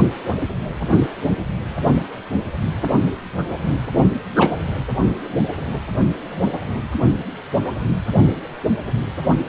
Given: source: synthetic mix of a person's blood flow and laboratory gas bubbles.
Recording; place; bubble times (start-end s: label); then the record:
Doppler ultrasound of blood flow; precordium
4.36-4.50 s: bubbles
From the record:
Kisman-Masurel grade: 113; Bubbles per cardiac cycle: 1 to 2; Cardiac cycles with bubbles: 1 to 10%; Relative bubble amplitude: loud (0.450 to 0.775); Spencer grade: 1 (occasional bubble signal discernible with the cardiac motion signal, with majority of cardiac periods free of bubbles); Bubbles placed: only in the low amplitude regions of the cardiac cycle